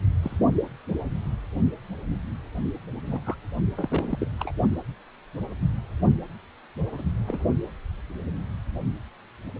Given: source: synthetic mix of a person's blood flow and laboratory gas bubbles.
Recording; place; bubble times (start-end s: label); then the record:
Doppler ultrasound of blood flow; precordium
0.23-0.36 s: bubbles
3.06-3.21 s: bubbles
3.25-3.35 s: bubbles
3.77-4.28 s: bubbles
4.40-4.51 s: bubbles
6.91-7.11 s: bubbles
7.29-7.40 s: bubbles
From the record:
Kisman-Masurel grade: 221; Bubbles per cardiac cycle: several, 3 to 8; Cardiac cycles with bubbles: 10 to 50%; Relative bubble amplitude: barely perceptible (0.100 to 0.250); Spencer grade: 2 (many but less than half of the cardiac periods contain bubble signals, singularly or in groups); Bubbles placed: only in the low amplitude regions of the cardiac cycle